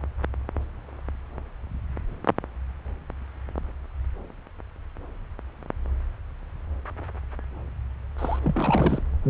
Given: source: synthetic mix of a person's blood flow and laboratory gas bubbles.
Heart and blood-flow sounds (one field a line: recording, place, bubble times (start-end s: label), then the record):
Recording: Doppler ultrasound of blood flow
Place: subclavian vein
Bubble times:
8.18-8.40 s: bubbles
8.43-9.02 s: bubbles
From the record:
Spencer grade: 1 (occasional bubble signal discernible with the cardiac motion signal, with majority of cardiac periods free of bubbles)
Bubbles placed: anywhere in the cardiac cycle